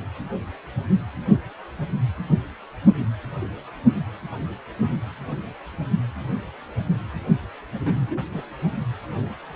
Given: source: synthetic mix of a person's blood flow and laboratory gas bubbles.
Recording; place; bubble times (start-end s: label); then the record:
Doppler ultrasound of blood flow; precordium
7.80-8.21 s: bubbles
8.34-8.43 s: bubbles
From the record:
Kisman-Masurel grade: 221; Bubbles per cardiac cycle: several, 3 to 8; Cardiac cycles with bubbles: 10 to 50%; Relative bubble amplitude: barely perceptible (0.100 to 0.250); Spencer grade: 2 (many but less than half of the cardiac periods contain bubble signals, singularly or in groups); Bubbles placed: only in the low amplitude regions of the cardiac cycle